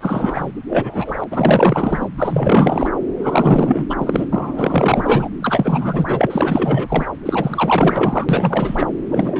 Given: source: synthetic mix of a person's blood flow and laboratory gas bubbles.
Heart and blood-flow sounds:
Doppler ultrasound of blood flow; subclavian vein
0.01-0.52 s: bubbles
0.69-1.24 s: bubbles
1.30-2.08 s: bubbles
2.17-2.90 s: bubbles
3.19-3.86 s: bubbles
3.89-4.26 s: bubbles
4.31-5.29 s: bubbles
5.42-6.27 s: bubbles
6.29-7.05 s: bubbles
7.25-8.87 s: bubbles
9.11-9.40 s: bubbles
From the record:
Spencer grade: 4 (maximum detectable bubble signal sounding continuously throughout systole and diastole of every cardiac period, and overriding the amplitude of the normal cardiac signals); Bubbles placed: anywhere in the cardiac cycle

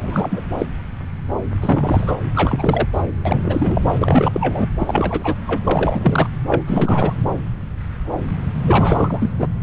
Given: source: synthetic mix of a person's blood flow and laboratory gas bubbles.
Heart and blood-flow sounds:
Doppler ultrasound of blood flow; subclavian vein
0.00-0.40 s: bubbles
0.58-0.66 s: bubbles
1.60-2.12 s: bubbles
2.35-2.87 s: bubbles
2.93-3.03 s: bubbles
3.25-3.79 s: bubbles
3.98-4.67 s: bubbles
4.79-5.35 s: bubbles
5.47-5.58 s: bubbles
5.64-6.30 s: bubbles
6.48-6.62 s: bubbles
6.67-7.13 s: bubbles
8.66-9.32 s: bubbles
9.39-9.47 s: bubbles
From the record:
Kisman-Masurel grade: 332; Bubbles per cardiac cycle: rolling drumbeat, 9 or more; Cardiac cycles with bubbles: 50 to 99%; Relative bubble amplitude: moderate (0.250 to 0.450); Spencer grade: 3 (all of the cardiac periods contain showers or single bubble signals, but not dominating or overriding the cardiac motion signals); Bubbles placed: anywhere in the cardiac cycle

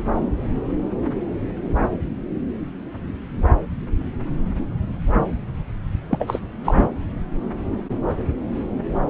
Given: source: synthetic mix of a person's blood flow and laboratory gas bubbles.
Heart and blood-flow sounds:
Doppler ultrasound of blood flow; subclavian vein
6.10-6.40 s: bubbles
6.63-6.89 s: bubbles
From the record:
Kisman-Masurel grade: 213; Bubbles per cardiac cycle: several, 3 to 8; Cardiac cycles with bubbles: 1 to 10%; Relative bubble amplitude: loud (0.450 to 0.775); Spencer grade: 1 (occasional bubble signal discernible with the cardiac motion signal, with majority of cardiac periods free of bubbles); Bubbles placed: anywhere in the cardiac cycle

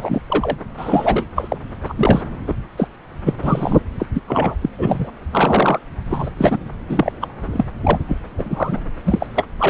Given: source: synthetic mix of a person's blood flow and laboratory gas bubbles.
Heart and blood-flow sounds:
Doppler ultrasound of blood flow; subclavian vein
0.00-0.22 s: bubbles
0.28-0.57 s: bubbles
0.77-1.26 s: bubbles
1.35-1.58 s: bubbles
1.86-2.22 s: bubbles
2.47-2.54 s: bubbles
2.77-2.88 s: bubbles
3.25-3.33 s: bubbles
3.42-3.80 s: bubbles
3.99-4.06 s: bubbles
4.15-4.21 s: bubbles
4.27-4.55 s: bubbles
4.62-4.70 s: bubbles
4.78-5.11 s: bubbles
5.31-5.79 s: bubbles
6.10-6.30 s: bubbles
6.37-6.58 s: bubbles
6.88-7.12 s: bubbles
7.21-7.28 s: bubbles
7.53-7.65 s: bubbles
7.83-7.98 s: bubbles
8.07-8.17 s: bubbles
8.38-8.80 s: bubbles
9.05-9.26 s: bubbles
9.35-9.46 s: bubbles
9.59-9.70 s: bubbles
From the record:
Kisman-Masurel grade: 243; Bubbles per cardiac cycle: several, 3 to 8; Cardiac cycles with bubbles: 100%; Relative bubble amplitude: loud (0.450 to 0.775); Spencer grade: 3 (all of the cardiac periods contain showers or single bubble signals, but not dominating or overriding the cardiac motion signals); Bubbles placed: anywhere in the cardiac cycle

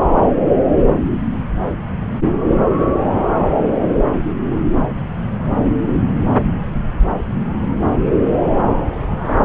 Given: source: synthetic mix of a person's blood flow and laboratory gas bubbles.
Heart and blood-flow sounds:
Doppler ultrasound of blood flow; subclavian vein
no bubbles
From the record:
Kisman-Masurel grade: 000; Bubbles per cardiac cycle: 0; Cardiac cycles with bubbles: 0%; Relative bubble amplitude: no bubbles discernible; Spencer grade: 0 (complete lack of bubble signals)

